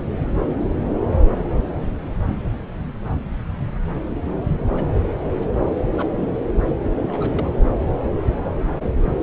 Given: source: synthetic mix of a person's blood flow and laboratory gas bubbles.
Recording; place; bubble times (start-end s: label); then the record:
Doppler ultrasound of blood flow; subclavian vein
4.59-4.87 s: bubbles
5.19-5.30 s: bubbles
5.40-5.51 s: bubbles
5.60-5.68 s: bubbles
5.86-6.38 s: bubbles
6.46-6.54 s: bubbles
6.83-6.91 s: bubbles
7.02-7.49 s: bubbles
From the record:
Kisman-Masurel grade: 221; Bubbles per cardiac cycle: several, 3 to 8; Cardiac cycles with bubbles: 10 to 50%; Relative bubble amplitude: barely perceptible (0.100 to 0.250); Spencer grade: 2 (many but less than half of the cardiac periods contain bubble signals, singularly or in groups); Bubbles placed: anywhere in the cardiac cycle